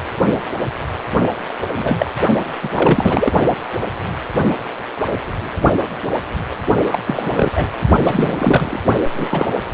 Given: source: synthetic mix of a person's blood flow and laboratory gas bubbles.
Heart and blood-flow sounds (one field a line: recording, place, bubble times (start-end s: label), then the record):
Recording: Doppler ultrasound of blood flow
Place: precordium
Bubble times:
1.74-2.10 s: bubbles
2.62-3.31 s: bubbles
6.86-6.99 s: bubbles
7.07-7.50 s: bubbles
7.55-7.70 s: bubbles
8.02-8.84 s: bubbles
9.14-9.27 s: bubbles
9.29-9.50 s: bubbles
From the record:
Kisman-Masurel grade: 223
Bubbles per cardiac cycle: several, 3 to 8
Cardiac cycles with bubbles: 10 to 50%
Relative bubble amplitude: loud (0.450 to 0.775)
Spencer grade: 2 (many but less than half of the cardiac periods contain bubble signals, singularly or in groups)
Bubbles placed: only in the low amplitude regions of the cardiac cycle